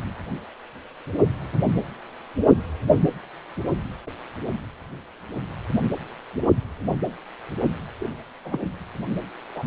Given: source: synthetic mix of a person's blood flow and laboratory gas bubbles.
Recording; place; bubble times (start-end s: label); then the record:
Doppler ultrasound of blood flow; precordium
7.99-8.09 s: bubbles
8.44-8.70 s: bubbles
9.55-9.64 s: bubbles
From the record:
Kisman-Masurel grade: 211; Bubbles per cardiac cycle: several, 3 to 8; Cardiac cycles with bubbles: 1 to 10%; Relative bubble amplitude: barely perceptible (0.100 to 0.250); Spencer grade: 1 (occasional bubble signal discernible with the cardiac motion signal, with majority of cardiac periods free of bubbles); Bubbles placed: only in the low amplitude regions of the cardiac cycle